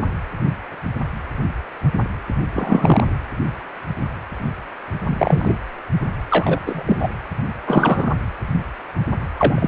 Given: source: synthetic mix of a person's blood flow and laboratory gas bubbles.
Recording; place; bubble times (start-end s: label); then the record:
Doppler ultrasound of blood flow; precordium
2.54-3.04 s: bubbles
5.06-5.55 s: bubbles
6.30-6.60 s: bubbles
6.65-7.09 s: bubbles
7.64-8.14 s: bubbles
9.37-9.67 s: bubbles
From the record:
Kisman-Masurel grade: 223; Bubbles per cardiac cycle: several, 3 to 8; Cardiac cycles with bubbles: 10 to 50%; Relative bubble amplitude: loud (0.450 to 0.775); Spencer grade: 2 (many but less than half of the cardiac periods contain bubble signals, singularly or in groups); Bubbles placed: anywhere in the cardiac cycle